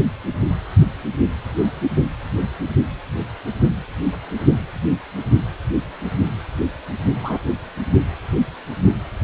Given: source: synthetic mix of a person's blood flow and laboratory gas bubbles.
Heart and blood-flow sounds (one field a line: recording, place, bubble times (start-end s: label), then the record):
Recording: Doppler ultrasound of blood flow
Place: precordium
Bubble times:
7.22-7.38 s: bubbles
From the record:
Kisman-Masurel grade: 112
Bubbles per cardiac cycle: 1 to 2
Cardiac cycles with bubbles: 1 to 10%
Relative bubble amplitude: moderate (0.250 to 0.450)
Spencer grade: 1 (occasional bubble signal discernible with the cardiac motion signal, with majority of cardiac periods free of bubbles)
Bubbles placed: only in the low amplitude regions of the cardiac cycle